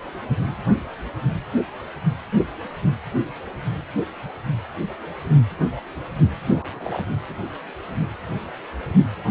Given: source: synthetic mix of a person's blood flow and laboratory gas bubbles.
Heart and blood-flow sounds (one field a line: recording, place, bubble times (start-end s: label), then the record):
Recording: Doppler ultrasound of blood flow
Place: precordium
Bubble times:
6.46-7.01 s: bubbles
From the record:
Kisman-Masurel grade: 211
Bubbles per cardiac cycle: several, 3 to 8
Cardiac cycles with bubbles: 1 to 10%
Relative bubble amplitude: barely perceptible (0.100 to 0.250)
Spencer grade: 1 (occasional bubble signal discernible with the cardiac motion signal, with majority of cardiac periods free of bubbles)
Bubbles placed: anywhere in the cardiac cycle